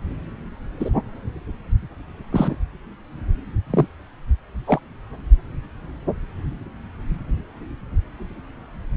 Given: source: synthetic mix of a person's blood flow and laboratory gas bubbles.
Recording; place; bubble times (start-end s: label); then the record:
Doppler ultrasound of blood flow; subclavian vein
0.79-0.91 s: bubbles
2.31-2.56 s: bubbles
3.70-3.87 s: bubbles
4.66-4.79 s: bubbles
From the record:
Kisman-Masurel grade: 123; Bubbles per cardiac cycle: 1 to 2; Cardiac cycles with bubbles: 10 to 50%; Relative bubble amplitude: loud (0.450 to 0.775); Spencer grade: 2 (many but less than half of the cardiac periods contain bubble signals, singularly or in groups); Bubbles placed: anywhere in the cardiac cycle